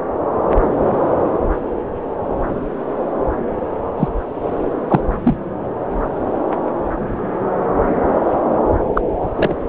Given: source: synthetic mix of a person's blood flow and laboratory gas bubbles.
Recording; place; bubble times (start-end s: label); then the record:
Doppler ultrasound of blood flow; subclavian vein
3.96-4.08 s: bubbles
4.88-5.00 s: bubbles
5.24-5.37 s: bubbles
8.95-9.01 s: bubbles
9.36-9.54 s: bubbles
From the record:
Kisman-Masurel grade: 123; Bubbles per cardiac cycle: 1 to 2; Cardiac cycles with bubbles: 10 to 50%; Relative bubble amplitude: loud (0.450 to 0.775); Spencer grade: 2 (many but less than half of the cardiac periods contain bubble signals, singularly or in groups); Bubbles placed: anywhere in the cardiac cycle